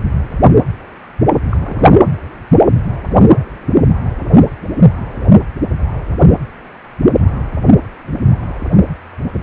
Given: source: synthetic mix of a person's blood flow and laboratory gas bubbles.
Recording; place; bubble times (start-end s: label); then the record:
Doppler ultrasound of blood flow; precordium
1.50-1.99 s: bubbles
From the record:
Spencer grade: 1 (occasional bubble signal discernible with the cardiac motion signal, with majority of cardiac periods free of bubbles); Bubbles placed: anywhere in the cardiac cycle